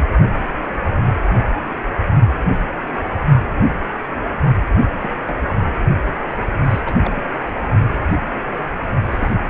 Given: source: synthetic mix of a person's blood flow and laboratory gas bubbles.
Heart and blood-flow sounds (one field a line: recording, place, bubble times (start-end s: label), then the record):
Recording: Doppler ultrasound of blood flow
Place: precordium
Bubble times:
4.95-5.00 s: bubbles
5.02-5.09 s: bubbles
5.25-5.36 s: bubbles
5.48-5.54 s: bubbles
6.46-6.52 s: bubbles
6.70-6.80 s: bubbles
6.86-6.96 s: bubbles
7.00-7.13 s: bubbles
7.16-7.24 s: bubbles
9.09-9.35 s: bubbles
From the record:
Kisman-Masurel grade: 221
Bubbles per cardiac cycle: several, 3 to 8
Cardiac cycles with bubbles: 10 to 50%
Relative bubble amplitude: barely perceptible (0.100 to 0.250)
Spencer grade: 2 (many but less than half of the cardiac periods contain bubble signals, singularly or in groups)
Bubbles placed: only in the low amplitude regions of the cardiac cycle